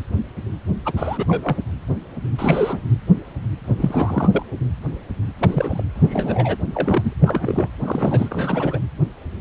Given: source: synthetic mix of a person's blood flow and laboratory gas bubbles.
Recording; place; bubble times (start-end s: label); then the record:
Doppler ultrasound of blood flow; precordium
0.85-0.93 s: bubbles
0.96-1.25 s: bubbles
1.27-1.57 s: bubbles
2.38-2.79 s: bubbles
3.76-4.43 s: bubbles
5.39-5.83 s: bubbles
5.95-6.56 s: bubbles
6.74-7.14 s: bubbles
7.22-7.69 s: bubbles
7.79-8.79 s: bubbles
From the record:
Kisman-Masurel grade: 232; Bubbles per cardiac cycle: several, 3 to 8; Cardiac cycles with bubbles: 50 to 99%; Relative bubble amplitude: moderate (0.250 to 0.450); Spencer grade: 3 (all of the cardiac periods contain showers or single bubble signals, but not dominating or overriding the cardiac motion signals); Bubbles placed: anywhere in the cardiac cycle